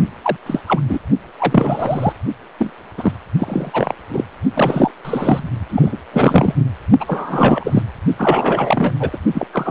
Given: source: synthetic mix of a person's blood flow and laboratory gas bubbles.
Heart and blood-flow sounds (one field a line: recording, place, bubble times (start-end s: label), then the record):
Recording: Doppler ultrasound of blood flow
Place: precordium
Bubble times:
0.22-0.36 s: bubbles
0.46-0.59 s: bubbles
0.67-0.80 s: bubbles
0.88-0.98 s: bubbles
1.38-2.12 s: bubbles
2.59-2.72 s: bubbles
2.97-3.12 s: bubbles
3.39-3.94 s: bubbles
4.08-4.24 s: bubbles
4.54-4.91 s: bubbles
5.04-5.50 s: bubbles
5.70-5.97 s: bubbles
6.12-6.54 s: bubbles
7.00-7.83 s: bubbles
8.17-8.93 s: bubbles
8.99-9.10 s: bubbles
9.12-9.18 s: bubbles
9.33-9.47 s: bubbles
9.52-9.70 s: bubbles
From the record:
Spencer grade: 3 (all of the cardiac periods contain showers or single bubble signals, but not dominating or overriding the cardiac motion signals)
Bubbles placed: only in the low amplitude regions of the cardiac cycle